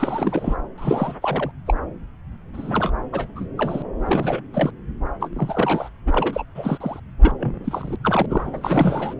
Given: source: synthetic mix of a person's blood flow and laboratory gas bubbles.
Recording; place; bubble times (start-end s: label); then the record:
Doppler ultrasound of blood flow; subclavian vein
0.00-0.56 s: bubbles
0.77-1.16 s: bubbles
1.22-1.51 s: bubbles
1.66-1.74 s: bubbles
2.54-2.92 s: bubbles
3.12-3.27 s: bubbles
3.35-3.48 s: bubbles
3.57-3.83 s: bubbles
4.05-4.41 s: bubbles
4.53-4.71 s: bubbles
5.20-5.29 s: bubbles
5.33-5.89 s: bubbles
6.06-6.43 s: bubbles
6.55-7.00 s: bubbles
7.22-7.32 s: bubbles
7.38-7.96 s: bubbles
8.04-8.26 s: bubbles
8.29-9.14 s: bubbles
From the record:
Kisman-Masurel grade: 342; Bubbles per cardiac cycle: rolling drumbeat, 9 or more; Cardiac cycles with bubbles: 100%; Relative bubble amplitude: moderate (0.250 to 0.450); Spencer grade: 3 (all of the cardiac periods contain showers or single bubble signals, but not dominating or overriding the cardiac motion signals); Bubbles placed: anywhere in the cardiac cycle